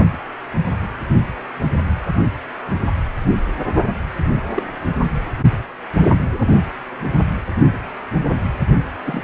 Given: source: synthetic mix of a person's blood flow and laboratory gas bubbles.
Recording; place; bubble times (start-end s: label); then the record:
Doppler ultrasound of blood flow; precordium
4.55-4.63 s: bubbles
9.05-9.23 s: bubbles
From the record:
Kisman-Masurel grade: 122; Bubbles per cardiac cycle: 1 to 2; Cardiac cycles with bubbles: 10 to 50%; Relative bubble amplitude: moderate (0.250 to 0.450); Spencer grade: 2 (many but less than half of the cardiac periods contain bubble signals, singularly or in groups); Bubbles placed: anywhere in the cardiac cycle